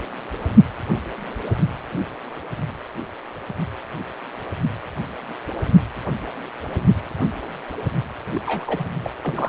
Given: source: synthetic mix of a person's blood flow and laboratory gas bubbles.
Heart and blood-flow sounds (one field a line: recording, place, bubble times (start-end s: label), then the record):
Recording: Doppler ultrasound of blood flow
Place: precordium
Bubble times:
8.35-8.41 s: bubbles
8.46-8.93 s: bubbles
9.03-9.10 s: bubbles
9.22-9.48 s: bubbles
From the record:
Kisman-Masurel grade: 221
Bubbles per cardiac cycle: several, 3 to 8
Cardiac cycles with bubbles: 10 to 50%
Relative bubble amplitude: barely perceptible (0.100 to 0.250)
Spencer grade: 2 (many but less than half of the cardiac periods contain bubble signals, singularly or in groups)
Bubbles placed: only in the low amplitude regions of the cardiac cycle